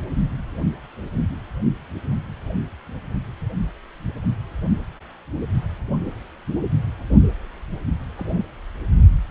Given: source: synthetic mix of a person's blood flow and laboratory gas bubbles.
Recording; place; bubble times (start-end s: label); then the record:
Doppler ultrasound of blood flow; precordium
8.17-8.44 s: bubbles
From the record:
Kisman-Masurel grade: 112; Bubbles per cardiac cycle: 1 to 2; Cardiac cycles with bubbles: 1 to 10%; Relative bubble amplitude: moderate (0.250 to 0.450); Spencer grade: 1 (occasional bubble signal discernible with the cardiac motion signal, with majority of cardiac periods free of bubbles); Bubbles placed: anywhere in the cardiac cycle